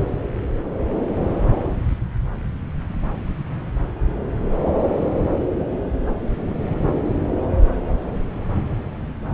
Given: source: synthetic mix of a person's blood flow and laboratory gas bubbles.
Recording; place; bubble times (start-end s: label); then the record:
Doppler ultrasound of blood flow; subclavian vein
no bubbles
From the record:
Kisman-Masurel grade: 000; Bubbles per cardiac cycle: 0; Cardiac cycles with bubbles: 0%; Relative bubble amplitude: no bubbles discernible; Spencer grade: 0 (complete lack of bubble signals)